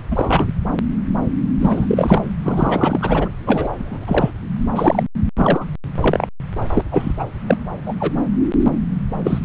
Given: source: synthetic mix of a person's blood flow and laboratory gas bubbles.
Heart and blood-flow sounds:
Doppler ultrasound of blood flow; subclavian vein
0.00-0.03 s: bubbles
0.10-0.46 s: bubbles
1.61-2.22 s: bubbles
2.42-3.29 s: bubbles
3.46-3.68 s: bubbles
3.72-4.30 s: bubbles
4.75-5.03 s: bubbles
5.37-5.64 s: bubbles
6.00-6.27 s: bubbles
6.75-6.85 s: bubbles
6.91-7.13 s: bubbles
7.18-7.25 s: bubbles
7.46-7.58 s: bubbles
7.86-7.94 s: bubbles
8.00-8.12 s: bubbles
9.24-9.38 s: bubbles
From the record:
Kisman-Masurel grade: 333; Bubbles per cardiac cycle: rolling drumbeat, 9 or more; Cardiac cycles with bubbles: 50 to 99%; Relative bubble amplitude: loud (0.450 to 0.775); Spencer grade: 3 (all of the cardiac periods contain showers or single bubble signals, but not dominating or overriding the cardiac motion signals); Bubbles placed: anywhere in the cardiac cycle

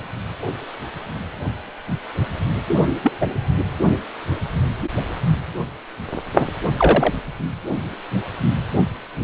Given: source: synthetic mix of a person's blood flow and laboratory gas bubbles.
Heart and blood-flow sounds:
Doppler ultrasound of blood flow; precordium
3.03-3.12 s: bubbles
3.21-3.28 s: bubbles
6.38-6.47 s: bubbles
6.77-7.13 s: bubbles
From the record:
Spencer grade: 2 (many but less than half of the cardiac periods contain bubble signals, singularly or in groups); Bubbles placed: only in the low amplitude regions of the cardiac cycle

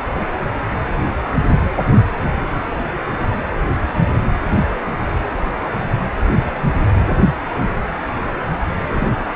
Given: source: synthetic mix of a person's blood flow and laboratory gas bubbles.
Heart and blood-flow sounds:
Doppler ultrasound of blood flow; precordium
8.95-9.07 s: bubbles
From the record:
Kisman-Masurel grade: 111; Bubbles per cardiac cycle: 1 to 2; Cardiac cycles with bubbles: 1 to 10%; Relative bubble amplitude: barely perceptible (0.100 to 0.250); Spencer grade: 1 (occasional bubble signal discernible with the cardiac motion signal, with majority of cardiac periods free of bubbles); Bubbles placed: anywhere in the cardiac cycle

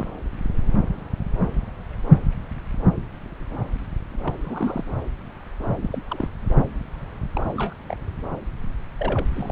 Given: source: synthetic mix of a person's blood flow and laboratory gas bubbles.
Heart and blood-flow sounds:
Doppler ultrasound of blood flow; subclavian vein
0.00-0.11 s: bubbles
4.24-4.34 s: bubbles
4.44-4.84 s: bubbles
5.69-5.75 s: bubbles
5.83-6.02 s: bubbles
6.08-6.29 s: bubbles
7.33-7.41 s: bubbles
7.44-7.74 s: bubbles
7.89-7.97 s: bubbles
8.99-9.26 s: bubbles
9.33-9.52 s: bubbles
From the record:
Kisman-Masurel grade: 221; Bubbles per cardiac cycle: several, 3 to 8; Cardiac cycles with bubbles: 10 to 50%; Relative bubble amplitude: barely perceptible (0.100 to 0.250); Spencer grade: 2 (many but less than half of the cardiac periods contain bubble signals, singularly or in groups); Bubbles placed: anywhere in the cardiac cycle

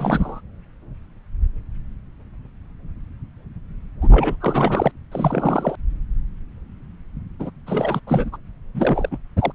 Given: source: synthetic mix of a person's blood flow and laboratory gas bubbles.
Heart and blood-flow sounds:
Doppler ultrasound of blood flow; subclavian vein
0.00-0.41 s: bubbles
4.01-4.37 s: bubbles
4.40-4.92 s: bubbles
5.12-5.75 s: bubbles
7.40-7.50 s: bubbles
7.67-8.00 s: bubbles
8.06-8.36 s: bubbles
8.74-9.17 s: bubbles
9.39-9.52 s: bubbles
From the record:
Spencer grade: 3 (all of the cardiac periods contain showers or single bubble signals, but not dominating or overriding the cardiac motion signals); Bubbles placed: anywhere in the cardiac cycle

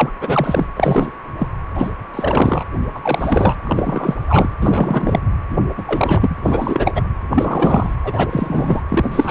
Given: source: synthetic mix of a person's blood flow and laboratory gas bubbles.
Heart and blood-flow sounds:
Doppler ultrasound of blood flow; precordium
0.00-0.11 s: bubbles
0.21-0.66 s: bubbles
0.76-1.10 s: bubbles
1.38-1.48 s: bubbles
1.75-1.90 s: bubbles
2.14-2.64 s: bubbles
2.94-2.99 s: bubbles
3.02-3.55 s: bubbles
3.64-4.15 s: bubbles
4.28-4.49 s: bubbles
4.60-5.20 s: bubbles
5.49-5.59 s: bubbles
5.77-5.83 s: bubbles
5.87-6.37 s: bubbles
6.41-7.03 s: bubbles
7.30-7.95 s: bubbles
8.04-8.81 s: bubbles
8.88-9.31 s: bubbles
From the record:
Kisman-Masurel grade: 343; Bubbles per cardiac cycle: rolling drumbeat, 9 or more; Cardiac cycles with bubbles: 100%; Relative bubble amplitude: loud (0.450 to 0.775); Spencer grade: 3 (all of the cardiac periods contain showers or single bubble signals, but not dominating or overriding the cardiac motion signals); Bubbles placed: anywhere in the cardiac cycle

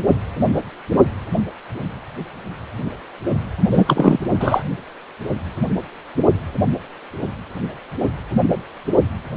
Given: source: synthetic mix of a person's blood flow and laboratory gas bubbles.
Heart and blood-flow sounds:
Doppler ultrasound of blood flow; precordium
3.71-3.85 s: bubbles
3.87-4.19 s: bubbles
4.33-4.64 s: bubbles
From the record:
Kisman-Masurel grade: 213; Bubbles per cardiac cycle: several, 3 to 8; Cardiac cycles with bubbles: 1 to 10%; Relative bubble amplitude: loud (0.450 to 0.775); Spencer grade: 1 (occasional bubble signal discernible with the cardiac motion signal, with majority of cardiac periods free of bubbles); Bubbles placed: anywhere in the cardiac cycle

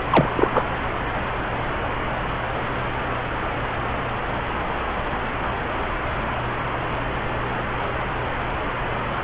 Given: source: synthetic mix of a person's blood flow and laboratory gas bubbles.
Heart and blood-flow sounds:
Doppler ultrasound of blood flow; subclavian vein
0.10-0.32 s: bubbles
0.36-0.67 s: bubbles
From the record:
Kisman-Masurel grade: 213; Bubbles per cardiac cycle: several, 3 to 8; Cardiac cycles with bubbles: 1 to 10%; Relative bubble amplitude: loud (0.450 to 0.775); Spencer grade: 1 (occasional bubble signal discernible with the cardiac motion signal, with majority of cardiac periods free of bubbles); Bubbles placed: anywhere in the cardiac cycle

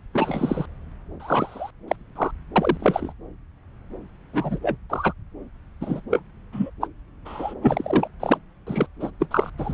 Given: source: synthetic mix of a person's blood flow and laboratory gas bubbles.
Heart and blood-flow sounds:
Doppler ultrasound of blood flow; subclavian vein
0.14-0.66 s: bubbles
1.20-1.71 s: bubbles
1.88-1.96 s: bubbles
2.16-2.31 s: bubbles
2.56-3.12 s: bubbles
4.33-4.76 s: bubbles
4.89-5.13 s: bubbles
5.81-6.00 s: bubbles
6.10-6.19 s: bubbles
6.52-6.70 s: bubbles
6.81-6.87 s: bubbles
7.25-7.54 s: bubbles
7.62-8.07 s: bubbles
8.20-8.38 s: bubbles
8.66-8.86 s: bubbles
9.00-9.11 s: bubbles
9.20-9.27 s: bubbles
9.30-9.50 s: bubbles
9.58-9.74 s: bubbles
From the record:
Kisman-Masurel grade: 232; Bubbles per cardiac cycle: several, 3 to 8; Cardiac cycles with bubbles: 50 to 99%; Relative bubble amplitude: moderate (0.250 to 0.450); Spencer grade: 3 (all of the cardiac periods contain showers or single bubble signals, but not dominating or overriding the cardiac motion signals); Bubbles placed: anywhere in the cardiac cycle

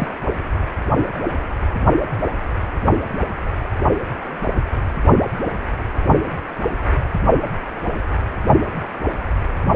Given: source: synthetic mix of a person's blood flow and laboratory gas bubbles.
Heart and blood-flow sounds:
Doppler ultrasound of blood flow; precordium
0.00-0.07 s: bubbles
From the record:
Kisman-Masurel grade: 112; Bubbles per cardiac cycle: 1 to 2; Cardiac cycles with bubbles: 1 to 10%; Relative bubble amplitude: moderate (0.250 to 0.450); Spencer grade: 1 (occasional bubble signal discernible with the cardiac motion signal, with majority of cardiac periods free of bubbles); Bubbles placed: only in the low amplitude regions of the cardiac cycle

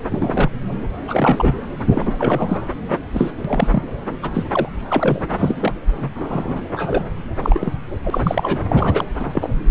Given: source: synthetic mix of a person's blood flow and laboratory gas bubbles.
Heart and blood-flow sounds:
Doppler ultrasound of blood flow; subclavian vein
0.12-0.49 s: bubbles
1.07-1.53 s: bubbles
1.89-2.13 s: bubbles
2.19-2.65 s: bubbles
2.90-2.98 s: bubbles
3.13-3.30 s: bubbles
3.44-3.67 s: bubbles
3.71-3.83 s: bubbles
4.22-4.45 s: bubbles
4.47-4.68 s: bubbles
4.88-5.22 s: bubbles
5.31-5.72 s: bubbles
6.01-6.10 s: bubbles
6.15-6.68 s: bubbles
6.73-7.04 s: bubbles
7.41-7.73 s: bubbles
8.04-8.61 s: bubbles
8.69-9.04 s: bubbles
9.19-9.49 s: bubbles
From the record:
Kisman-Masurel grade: 242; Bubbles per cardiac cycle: several, 3 to 8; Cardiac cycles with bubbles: 100%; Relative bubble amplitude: moderate (0.250 to 0.450); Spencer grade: 3 (all of the cardiac periods contain showers or single bubble signals, but not dominating or overriding the cardiac motion signals); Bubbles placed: anywhere in the cardiac cycle

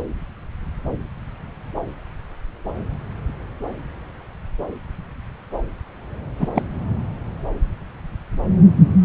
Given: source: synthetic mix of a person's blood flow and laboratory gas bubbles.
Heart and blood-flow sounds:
Doppler ultrasound of blood flow; subclavian vein
6.38-6.49 s: bubbles
6.54-6.63 s: bubbles
From the record:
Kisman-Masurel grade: 213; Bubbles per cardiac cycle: several, 3 to 8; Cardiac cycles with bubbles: 1 to 10%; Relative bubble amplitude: loud (0.450 to 0.775); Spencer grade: 1 (occasional bubble signal discernible with the cardiac motion signal, with majority of cardiac periods free of bubbles); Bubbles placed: anywhere in the cardiac cycle

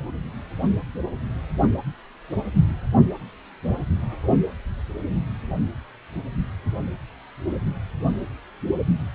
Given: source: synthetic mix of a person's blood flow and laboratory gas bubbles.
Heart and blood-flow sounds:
Doppler ultrasound of blood flow; precordium
no bubbles
From the record:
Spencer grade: 0 (complete lack of bubble signals)

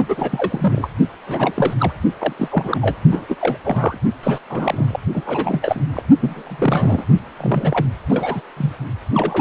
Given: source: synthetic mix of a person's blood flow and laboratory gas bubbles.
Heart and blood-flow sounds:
Doppler ultrasound of blood flow; precordium
0.08-0.89 s: bubbles
1.26-1.74 s: bubbles
1.79-1.92 s: bubbles
2.19-2.33 s: bubbles
2.36-2.97 s: bubbles
3.11-3.25 s: bubbles
3.29-3.36 s: bubbles
3.40-3.57 s: bubbles
3.64-3.98 s: bubbles
4.23-4.38 s: bubbles
4.49-4.99 s: bubbles
5.13-5.84 s: bubbles
5.93-6.03 s: bubbles
6.21-7.06 s: bubbles
7.38-7.86 s: bubbles
8.09-8.41 s: bubbles
8.57-8.73 s: bubbles
9.13-9.41 s: bubbles
From the record:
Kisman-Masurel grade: 342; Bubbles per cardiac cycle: rolling drumbeat, 9 or more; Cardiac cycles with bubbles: 100%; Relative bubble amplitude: moderate (0.250 to 0.450); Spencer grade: 3 (all of the cardiac periods contain showers or single bubble signals, but not dominating or overriding the cardiac motion signals); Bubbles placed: only in the low amplitude regions of the cardiac cycle

